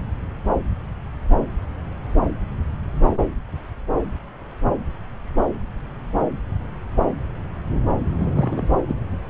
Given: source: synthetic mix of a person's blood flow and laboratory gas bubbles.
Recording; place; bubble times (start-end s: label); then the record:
Doppler ultrasound of blood flow; subclavian vein
8.20-8.67 s: bubbles
8.88-8.95 s: bubbles
From the record:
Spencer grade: 1 (occasional bubble signal discernible with the cardiac motion signal, with majority of cardiac periods free of bubbles); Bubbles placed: anywhere in the cardiac cycle